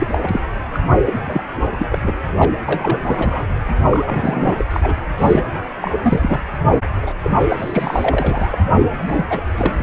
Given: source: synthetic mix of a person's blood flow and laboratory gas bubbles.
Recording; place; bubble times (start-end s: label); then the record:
Doppler ultrasound of blood flow; precordium
0.00-0.39 s: bubbles
0.72-0.79 s: bubbles
0.89-0.98 s: bubbles
1.05-1.19 s: bubbles
1.25-1.43 s: bubbles
1.78-1.87 s: bubbles
1.91-1.98 s: bubbles
2.02-2.15 s: bubbles
2.39-2.50 s: bubbles
2.67-3.44 s: bubbles
3.91-4.65 s: bubbles
4.70-4.96 s: bubbles
5.18-5.43 s: bubbles
5.81-6.41 s: bubbles
6.91-7.17 s: bubbles
7.23-7.31 s: bubbles
7.39-7.45 s: bubbles
7.48-8.56 s: bubbles
9.07-9.25 s: bubbles
9.30-9.42 s: bubbles
9.56-9.83 s: bubbles
From the record:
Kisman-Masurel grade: 342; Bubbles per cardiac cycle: rolling drumbeat, 9 or more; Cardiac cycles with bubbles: 100%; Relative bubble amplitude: moderate (0.250 to 0.450); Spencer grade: 3 (all of the cardiac periods contain showers or single bubble signals, but not dominating or overriding the cardiac motion signals); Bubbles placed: anywhere in the cardiac cycle